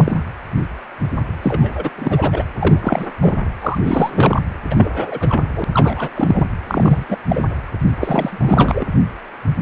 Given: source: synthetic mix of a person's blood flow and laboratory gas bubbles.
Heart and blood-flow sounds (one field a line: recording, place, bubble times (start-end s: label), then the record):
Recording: Doppler ultrasound of blood flow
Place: precordium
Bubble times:
0.00-0.24 s: bubbles
1.42-1.90 s: bubbles
1.97-2.43 s: bubbles
2.59-3.08 s: bubbles
3.20-3.35 s: bubbles
3.61-3.79 s: bubbles
3.83-4.42 s: bubbles
4.70-5.43 s: bubbles
5.55-5.65 s: bubbles
5.74-6.10 s: bubbles
6.16-6.47 s: bubbles
6.67-7.05 s: bubbles
7.09-7.17 s: bubbles
7.29-7.41 s: bubbles
8.01-8.86 s: bubbles
From the record:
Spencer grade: 3 (all of the cardiac periods contain showers or single bubble signals, but not dominating or overriding the cardiac motion signals)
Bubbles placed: anywhere in the cardiac cycle